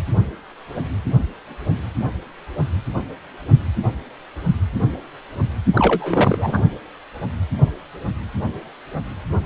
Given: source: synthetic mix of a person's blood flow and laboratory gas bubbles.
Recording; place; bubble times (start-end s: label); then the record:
Doppler ultrasound of blood flow; precordium
5.75-6.62 s: bubbles
From the record:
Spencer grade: 1 (occasional bubble signal discernible with the cardiac motion signal, with majority of cardiac periods free of bubbles); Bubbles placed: only in the low amplitude regions of the cardiac cycle